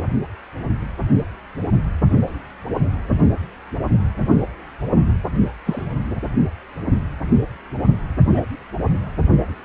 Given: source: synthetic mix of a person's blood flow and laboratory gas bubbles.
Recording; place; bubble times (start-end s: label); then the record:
Doppler ultrasound of blood flow; precordium
5.66-5.85 s: bubbles
8.30-8.46 s: bubbles
From the record:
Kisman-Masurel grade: 122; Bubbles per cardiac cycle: 1 to 2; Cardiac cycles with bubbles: 10 to 50%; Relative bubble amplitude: moderate (0.250 to 0.450); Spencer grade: 2 (many but less than half of the cardiac periods contain bubble signals, singularly or in groups); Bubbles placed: only in the low amplitude regions of the cardiac cycle